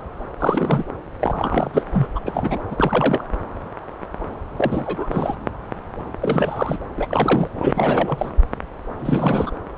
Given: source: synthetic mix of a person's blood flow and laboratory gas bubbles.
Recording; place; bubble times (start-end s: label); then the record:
Doppler ultrasound of blood flow; subclavian vein
0.39-0.84 s: bubbles
1.20-1.71 s: bubbles
1.73-1.84 s: bubbles
1.92-2.08 s: bubbles
2.15-2.20 s: bubbles
2.25-2.60 s: bubbles
2.71-3.25 s: bubbles
4.57-5.36 s: bubbles
6.21-6.78 s: bubbles
6.97-7.50 s: bubbles
7.60-7.72 s: bubbles
7.75-8.30 s: bubbles
9.00-9.52 s: bubbles
From the record:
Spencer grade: 3 (all of the cardiac periods contain showers or single bubble signals, but not dominating or overriding the cardiac motion signals); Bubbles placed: anywhere in the cardiac cycle